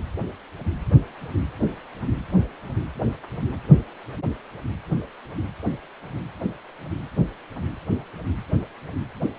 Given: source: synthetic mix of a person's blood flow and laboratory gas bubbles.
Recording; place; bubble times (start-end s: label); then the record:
Doppler ultrasound of blood flow; precordium
no bubbles
From the record:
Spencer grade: 0 (complete lack of bubble signals)